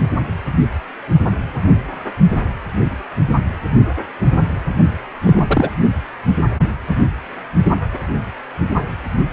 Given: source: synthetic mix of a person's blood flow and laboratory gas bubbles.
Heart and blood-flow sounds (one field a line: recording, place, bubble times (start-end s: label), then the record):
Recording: Doppler ultrasound of blood flow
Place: precordium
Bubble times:
5.24-5.70 s: bubbles
From the record:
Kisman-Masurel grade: 223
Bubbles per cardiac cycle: several, 3 to 8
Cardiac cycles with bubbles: 10 to 50%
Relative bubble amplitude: loud (0.450 to 0.775)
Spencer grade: 2 (many but less than half of the cardiac periods contain bubble signals, singularly or in groups)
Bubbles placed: only in the low amplitude regions of the cardiac cycle